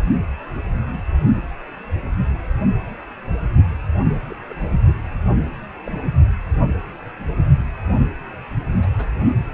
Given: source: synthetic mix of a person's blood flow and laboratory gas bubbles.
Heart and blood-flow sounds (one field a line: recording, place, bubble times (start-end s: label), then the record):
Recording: Doppler ultrasound of blood flow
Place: precordium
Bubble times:
4.30-4.35 s: bubbles
4.49-4.53 s: bubbles
5.86-5.90 s: bubbles
8.81-9.06 s: bubbles
From the record:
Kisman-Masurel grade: 121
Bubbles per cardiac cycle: 1 to 2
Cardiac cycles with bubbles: 10 to 50%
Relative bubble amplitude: barely perceptible (0.100 to 0.250)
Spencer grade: 2 (many but less than half of the cardiac periods contain bubble signals, singularly or in groups)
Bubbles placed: anywhere in the cardiac cycle